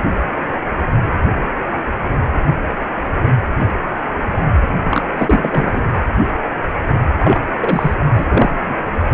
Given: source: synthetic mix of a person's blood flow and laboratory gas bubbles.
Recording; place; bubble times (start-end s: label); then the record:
Doppler ultrasound of blood flow; precordium
4.91-5.04 s: bubbles
5.17-5.82 s: bubbles
7.19-7.41 s: bubbles
7.60-7.95 s: bubbles
8.16-8.27 s: bubbles
8.31-8.55 s: bubbles
8.63-8.76 s: bubbles
9.00-9.04 s: bubbles
From the record:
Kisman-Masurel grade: 223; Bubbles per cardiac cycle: several, 3 to 8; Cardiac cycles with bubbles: 10 to 50%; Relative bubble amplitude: loud (0.450 to 0.775); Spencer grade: 2 (many but less than half of the cardiac periods contain bubble signals, singularly or in groups); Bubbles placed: anywhere in the cardiac cycle